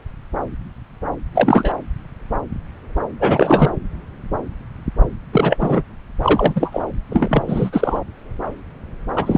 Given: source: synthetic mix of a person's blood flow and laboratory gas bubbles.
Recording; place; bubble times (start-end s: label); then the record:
Doppler ultrasound of blood flow; subclavian vein
1.34-1.76 s: bubbles
3.20-3.69 s: bubbles
5.32-5.82 s: bubbles
6.23-6.82 s: bubbles
7.09-7.43 s: bubbles
7.47-7.99 s: bubbles
9.16-9.37 s: bubbles
From the record:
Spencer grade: 2 (many but less than half of the cardiac periods contain bubble signals, singularly or in groups); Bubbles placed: anywhere in the cardiac cycle